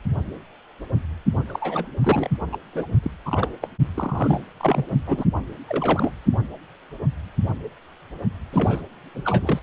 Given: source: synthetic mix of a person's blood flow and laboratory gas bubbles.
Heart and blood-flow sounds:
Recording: Doppler ultrasound of blood flow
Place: precordium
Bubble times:
1.47-1.88 s: bubbles
2.04-2.29 s: bubbles
2.52-2.57 s: bubbles
2.72-2.97 s: bubbles
3.02-3.11 s: bubbles
3.25-3.49 s: bubbles
3.61-3.67 s: bubbles
3.94-4.40 s: bubbles
4.58-4.86 s: bubbles
5.07-5.25 s: bubbles
5.69-6.11 s: bubbles
8.52-8.81 s: bubbles
9.14-9.59 s: bubbles
From the record:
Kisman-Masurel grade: 332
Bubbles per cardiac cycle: rolling drumbeat, 9 or more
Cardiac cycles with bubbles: 50 to 99%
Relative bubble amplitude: moderate (0.250 to 0.450)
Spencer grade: 3 (all of the cardiac periods contain showers or single bubble signals, but not dominating or overriding the cardiac motion signals)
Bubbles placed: only in the low amplitude regions of the cardiac cycle

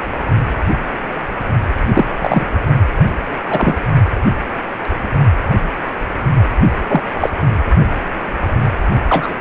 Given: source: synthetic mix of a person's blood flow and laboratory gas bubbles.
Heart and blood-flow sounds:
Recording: Doppler ultrasound of blood flow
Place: precordium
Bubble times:
1.88-2.05 s: bubbles
2.21-2.46 s: bubbles
3.50-3.74 s: bubbles
6.88-7.03 s: bubbles
7.20-7.31 s: bubbles
9.08-9.34 s: bubbles
From the record:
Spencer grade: 2 (many but less than half of the cardiac periods contain bubble signals, singularly or in groups)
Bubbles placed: only in the low amplitude regions of the cardiac cycle

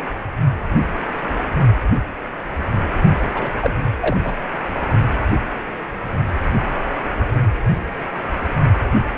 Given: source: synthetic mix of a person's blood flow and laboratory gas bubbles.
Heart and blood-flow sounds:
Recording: Doppler ultrasound of blood flow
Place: precordium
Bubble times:
3.34-3.50 s: bubbles
3.60-3.74 s: bubbles
4.00-4.18 s: bubbles
4.24-4.34 s: bubbles
From the record:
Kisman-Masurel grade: 212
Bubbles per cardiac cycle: several, 3 to 8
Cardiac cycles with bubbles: 1 to 10%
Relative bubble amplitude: moderate (0.250 to 0.450)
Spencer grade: 1 (occasional bubble signal discernible with the cardiac motion signal, with majority of cardiac periods free of bubbles)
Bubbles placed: only in the low amplitude regions of the cardiac cycle

